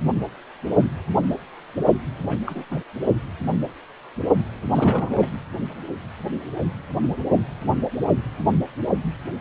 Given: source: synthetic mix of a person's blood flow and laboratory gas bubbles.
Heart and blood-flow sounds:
Doppler ultrasound of blood flow; precordium
2.24-2.37 s: bubbles
2.46-2.64 s: bubbles
2.70-2.78 s: bubbles
4.74-5.26 s: bubbles
From the record:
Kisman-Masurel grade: 221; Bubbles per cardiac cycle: several, 3 to 8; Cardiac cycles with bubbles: 10 to 50%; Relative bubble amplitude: barely perceptible (0.100 to 0.250); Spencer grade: 2 (many but less than half of the cardiac periods contain bubble signals, singularly or in groups); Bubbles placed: only in the low amplitude regions of the cardiac cycle

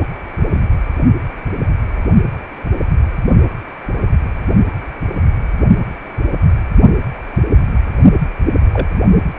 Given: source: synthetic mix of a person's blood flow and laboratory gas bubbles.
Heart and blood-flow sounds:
Doppler ultrasound of blood flow; precordium
0.54-0.62 s: bubbles
8.73-8.88 s: bubbles
From the record:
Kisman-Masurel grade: 122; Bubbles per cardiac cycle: 1 to 2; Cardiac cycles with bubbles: 10 to 50%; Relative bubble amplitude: moderate (0.250 to 0.450); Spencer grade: 2 (many but less than half of the cardiac periods contain bubble signals, singularly or in groups); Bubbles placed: only in the low amplitude regions of the cardiac cycle

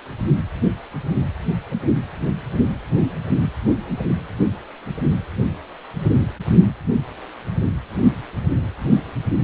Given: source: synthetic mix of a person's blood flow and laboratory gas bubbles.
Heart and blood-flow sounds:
Doppler ultrasound of blood flow; precordium
no bubbles
From the record:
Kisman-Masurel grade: 000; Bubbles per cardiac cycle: 0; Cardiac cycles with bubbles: 0%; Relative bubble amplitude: no bubbles discernible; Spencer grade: 0 (complete lack of bubble signals)

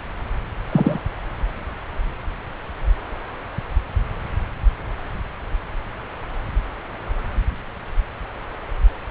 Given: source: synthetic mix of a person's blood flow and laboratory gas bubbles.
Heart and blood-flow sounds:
Doppler ultrasound of blood flow; subclavian vein
0.72-1.00 s: bubbles
From the record:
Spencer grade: 1 (occasional bubble signal discernible with the cardiac motion signal, with majority of cardiac periods free of bubbles); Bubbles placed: anywhere in the cardiac cycle

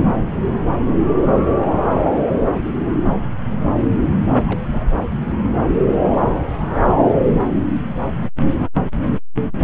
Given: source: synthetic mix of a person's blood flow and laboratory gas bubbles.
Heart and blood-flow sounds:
Doppler ultrasound of blood flow; subclavian vein
4.47-4.64 s: bubbles
4.71-4.88 s: bubbles
From the record:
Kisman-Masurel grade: 121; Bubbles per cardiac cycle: 1 to 2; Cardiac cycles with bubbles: 10 to 50%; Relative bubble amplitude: barely perceptible (0.100 to 0.250); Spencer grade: 2 (many but less than half of the cardiac periods contain bubble signals, singularly or in groups); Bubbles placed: anywhere in the cardiac cycle

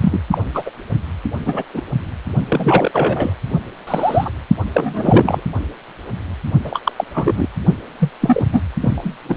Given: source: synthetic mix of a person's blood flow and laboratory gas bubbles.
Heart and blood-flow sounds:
Doppler ultrasound of blood flow; precordium
0.00-0.20 s: bubbles
0.31-0.38 s: bubbles
0.54-0.63 s: bubbles
0.66-0.70 s: bubbles
1.45-1.64 s: bubbles
1.74-1.81 s: bubbles
2.49-3.33 s: bubbles
3.87-4.32 s: bubbles
4.73-5.44 s: bubbles
6.64-6.80 s: bubbles
6.83-6.92 s: bubbles
6.96-7.04 s: bubbles
7.14-7.48 s: bubbles
7.98-8.10 s: bubbles
8.21-8.45 s: bubbles
8.52-8.62 s: bubbles
8.81-9.16 s: bubbles
9.28-9.37 s: bubbles
From the record:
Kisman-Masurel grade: 233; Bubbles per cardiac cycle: several, 3 to 8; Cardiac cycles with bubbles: 50 to 99%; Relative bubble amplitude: loud (0.450 to 0.775); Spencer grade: 3 (all of the cardiac periods contain showers or single bubble signals, but not dominating or overriding the cardiac motion signals); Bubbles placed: only in the low amplitude regions of the cardiac cycle

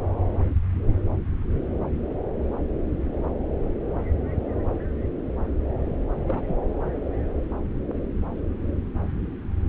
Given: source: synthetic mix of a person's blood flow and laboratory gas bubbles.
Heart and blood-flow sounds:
Doppler ultrasound of blood flow; subclavian vein
6.28-6.43 s: bubbles
6.47-6.55 s: bubbles
From the record:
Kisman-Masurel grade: 211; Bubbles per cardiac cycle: several, 3 to 8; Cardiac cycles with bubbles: 1 to 10%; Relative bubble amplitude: barely perceptible (0.100 to 0.250); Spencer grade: 1 (occasional bubble signal discernible with the cardiac motion signal, with majority of cardiac periods free of bubbles); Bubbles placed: anywhere in the cardiac cycle

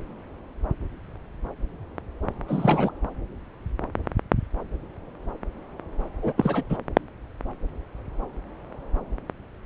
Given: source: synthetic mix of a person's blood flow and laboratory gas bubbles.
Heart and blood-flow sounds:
Doppler ultrasound of blood flow; subclavian vein
2.48-2.91 s: bubbles
6.22-6.33 s: bubbles
6.37-6.63 s: bubbles
6.70-6.78 s: bubbles
From the record:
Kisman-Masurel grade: 222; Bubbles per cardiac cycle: several, 3 to 8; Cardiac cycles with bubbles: 10 to 50%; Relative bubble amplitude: moderate (0.250 to 0.450); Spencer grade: 2 (many but less than half of the cardiac periods contain bubble signals, singularly or in groups); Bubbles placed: anywhere in the cardiac cycle

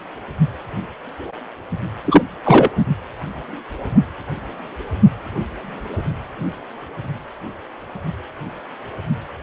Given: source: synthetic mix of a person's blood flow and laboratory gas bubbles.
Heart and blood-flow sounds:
Doppler ultrasound of blood flow; precordium
2.04-2.23 s: bubbles
2.44-2.69 s: bubbles
2.76-2.85 s: bubbles
From the record:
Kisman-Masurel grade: 213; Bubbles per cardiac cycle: several, 3 to 8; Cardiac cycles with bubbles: 1 to 10%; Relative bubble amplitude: loud (0.450 to 0.775); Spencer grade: 1 (occasional bubble signal discernible with the cardiac motion signal, with majority of cardiac periods free of bubbles); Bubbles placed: only in the low amplitude regions of the cardiac cycle

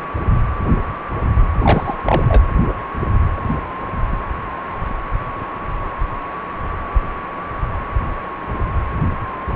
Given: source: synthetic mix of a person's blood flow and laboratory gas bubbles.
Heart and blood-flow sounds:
Doppler ultrasound of blood flow; precordium
1.62-1.95 s: bubbles
2.05-2.42 s: bubbles
From the record:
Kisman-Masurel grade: 213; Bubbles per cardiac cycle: several, 3 to 8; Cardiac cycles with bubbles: 1 to 10%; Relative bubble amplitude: loud (0.450 to 0.775); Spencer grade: 1 (occasional bubble signal discernible with the cardiac motion signal, with majority of cardiac periods free of bubbles); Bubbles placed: anywhere in the cardiac cycle

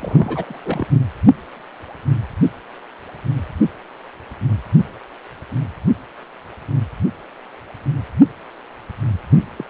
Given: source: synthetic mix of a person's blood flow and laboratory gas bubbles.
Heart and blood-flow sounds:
Doppler ultrasound of blood flow; precordium
0.00-0.88 s: bubbles
9.57-9.64 s: bubbles
From the record:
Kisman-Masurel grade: 222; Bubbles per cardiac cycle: several, 3 to 8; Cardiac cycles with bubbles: 10 to 50%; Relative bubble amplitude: moderate (0.250 to 0.450); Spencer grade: 2 (many but less than half of the cardiac periods contain bubble signals, singularly or in groups); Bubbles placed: anywhere in the cardiac cycle

